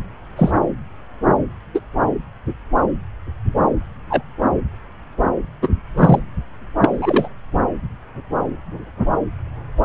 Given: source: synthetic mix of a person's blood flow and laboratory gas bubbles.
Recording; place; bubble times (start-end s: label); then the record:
Doppler ultrasound of blood flow; subclavian vein
0.36-0.52 s: bubbles
1.74-1.80 s: bubbles
4.10-4.22 s: bubbles
5.62-5.69 s: bubbles
5.96-6.19 s: bubbles
6.82-7.29 s: bubbles
From the record:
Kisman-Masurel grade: 123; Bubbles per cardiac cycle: 1 to 2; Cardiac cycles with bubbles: 10 to 50%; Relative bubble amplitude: loud (0.450 to 0.775); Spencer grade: 2 (many but less than half of the cardiac periods contain bubble signals, singularly or in groups); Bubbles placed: anywhere in the cardiac cycle